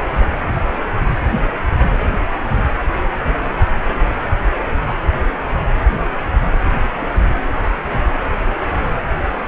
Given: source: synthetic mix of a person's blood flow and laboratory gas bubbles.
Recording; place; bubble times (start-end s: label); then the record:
Doppler ultrasound of blood flow; precordium
0.00-0.11 s: bubbles
0.20-0.35 s: bubbles
0.45-0.53 s: bubbles
0.69-0.73 s: bubbles
0.76-0.83 s: bubbles
6.63-6.74 s: bubbles
6.95-7.22 s: bubbles
From the record:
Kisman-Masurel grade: 221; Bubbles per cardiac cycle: several, 3 to 8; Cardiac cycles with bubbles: 10 to 50%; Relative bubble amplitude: barely perceptible (0.100 to 0.250); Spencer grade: 2 (many but less than half of the cardiac periods contain bubble signals, singularly or in groups); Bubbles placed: anywhere in the cardiac cycle